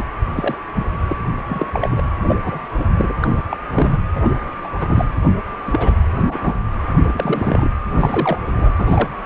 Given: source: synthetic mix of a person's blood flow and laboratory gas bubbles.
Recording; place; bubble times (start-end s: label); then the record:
Doppler ultrasound of blood flow; precordium
0.00-0.04 s: bubbles
0.36-0.57 s: bubbles
0.76-0.85 s: bubbles
1.08-1.17 s: bubbles
1.40-1.42 s: bubbles
1.49-1.67 s: bubbles
1.73-2.04 s: bubbles
2.27-2.37 s: bubbles
2.45-2.67 s: bubbles
2.76-2.85 s: bubbles
2.97-3.14 s: bubbles
3.21-3.43 s: bubbles
3.49-3.57 s: bubbles
3.72-3.98 s: bubbles
4.13-4.35 s: bubbles
4.63-4.71 s: bubbles
4.80-5.05 s: bubbles
5.67-5.93 s: bubbles
6.13-6.55 s: bubbles
7.08-7.69 s: bubbles
7.94-8.38 s: bubbles
8.45-8.69 s: bubbles
8.77-9.09 s: bubbles
From the record:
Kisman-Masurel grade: 242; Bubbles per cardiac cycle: several, 3 to 8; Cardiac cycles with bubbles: 100%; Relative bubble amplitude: moderate (0.250 to 0.450); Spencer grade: 3 (all of the cardiac periods contain showers or single bubble signals, but not dominating or overriding the cardiac motion signals); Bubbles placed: anywhere in the cardiac cycle